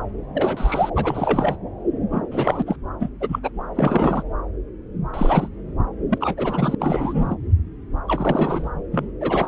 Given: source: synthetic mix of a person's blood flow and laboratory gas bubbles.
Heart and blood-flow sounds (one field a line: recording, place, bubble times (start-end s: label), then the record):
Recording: Doppler ultrasound of blood flow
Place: subclavian vein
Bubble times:
0.34-0.90 s: bubbles
0.95-1.56 s: bubbles
2.11-2.22 s: bubbles
2.31-2.64 s: bubbles
2.67-2.76 s: bubbles
3.00-3.08 s: bubbles
3.21-3.40 s: bubbles
3.43-3.50 s: bubbles
3.76-4.22 s: bubbles
5.13-5.48 s: bubbles
6.10-6.75 s: bubbles
6.80-7.36 s: bubbles
8.07-8.70 s: bubbles
8.91-9.06 s: bubbles
9.21-9.48 s: bubbles
From the record:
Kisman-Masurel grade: 232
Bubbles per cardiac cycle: several, 3 to 8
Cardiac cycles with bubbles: 50 to 99%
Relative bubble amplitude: moderate (0.250 to 0.450)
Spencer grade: 3 (all of the cardiac periods contain showers or single bubble signals, but not dominating or overriding the cardiac motion signals)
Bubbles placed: anywhere in the cardiac cycle